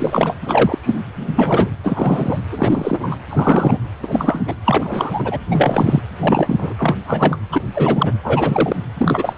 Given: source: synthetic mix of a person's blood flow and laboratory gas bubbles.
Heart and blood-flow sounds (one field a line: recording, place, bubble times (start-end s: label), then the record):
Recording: Doppler ultrasound of blood flow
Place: precordium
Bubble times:
0.00-0.35 s: bubbles
0.41-0.78 s: bubbles
0.82-1.02 s: bubbles
1.14-1.71 s: bubbles
1.83-2.38 s: bubbles
2.52-3.16 s: bubbles
3.29-3.78 s: bubbles
4.02-4.56 s: bubbles
4.65-5.38 s: bubbles
5.50-6.01 s: bubbles
6.20-6.73 s: bubbles
6.78-6.95 s: bubbles
7.04-7.38 s: bubbles
7.51-7.61 s: bubbles
7.75-8.13 s: bubbles
8.23-8.76 s: bubbles
8.97-9.34 s: bubbles
From the record:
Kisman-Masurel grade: 343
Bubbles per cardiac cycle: rolling drumbeat, 9 or more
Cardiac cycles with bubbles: 100%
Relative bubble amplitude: loud (0.450 to 0.775)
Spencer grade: 3 (all of the cardiac periods contain showers or single bubble signals, but not dominating or overriding the cardiac motion signals)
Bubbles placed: anywhere in the cardiac cycle